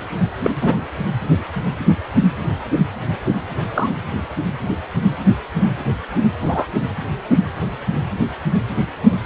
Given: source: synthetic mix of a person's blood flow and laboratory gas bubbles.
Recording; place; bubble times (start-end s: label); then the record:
Doppler ultrasound of blood flow; precordium
0.44-0.50 s: bubbles
0.61-0.74 s: bubbles
3.74-3.90 s: bubbles
6.41-6.67 s: bubbles
From the record:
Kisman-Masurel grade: 123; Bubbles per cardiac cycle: 1 to 2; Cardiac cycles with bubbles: 10 to 50%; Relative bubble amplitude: loud (0.450 to 0.775); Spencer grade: 2 (many but less than half of the cardiac periods contain bubble signals, singularly or in groups); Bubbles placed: anywhere in the cardiac cycle